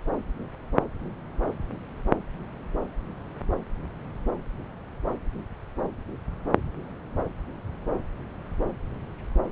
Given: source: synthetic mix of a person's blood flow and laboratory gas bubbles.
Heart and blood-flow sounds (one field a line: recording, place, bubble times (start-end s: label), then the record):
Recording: Doppler ultrasound of blood flow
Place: subclavian vein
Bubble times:
no bubbles
From the record:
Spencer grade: 0 (complete lack of bubble signals)